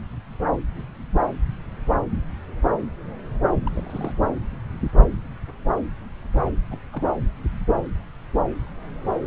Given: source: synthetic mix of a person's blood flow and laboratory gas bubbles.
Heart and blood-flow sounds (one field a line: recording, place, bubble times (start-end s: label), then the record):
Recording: Doppler ultrasound of blood flow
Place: subclavian vein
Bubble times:
3.62-4.12 s: bubbles
6.71-6.79 s: bubbles
6.92-7.01 s: bubbles
From the record:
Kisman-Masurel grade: 221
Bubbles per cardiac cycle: several, 3 to 8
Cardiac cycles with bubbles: 10 to 50%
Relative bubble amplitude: barely perceptible (0.100 to 0.250)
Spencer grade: 2 (many but less than half of the cardiac periods contain bubble signals, singularly or in groups)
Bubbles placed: anywhere in the cardiac cycle